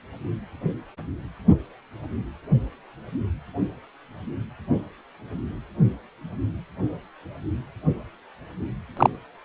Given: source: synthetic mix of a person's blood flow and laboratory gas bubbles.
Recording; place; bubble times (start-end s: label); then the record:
Doppler ultrasound of blood flow; precordium
8.97-9.10 s: bubbles
From the record:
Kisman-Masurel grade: 123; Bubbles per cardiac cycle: 1 to 2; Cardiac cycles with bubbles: 10 to 50%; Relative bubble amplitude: loud (0.450 to 0.775); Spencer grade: 2 (many but less than half of the cardiac periods contain bubble signals, singularly or in groups); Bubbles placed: anywhere in the cardiac cycle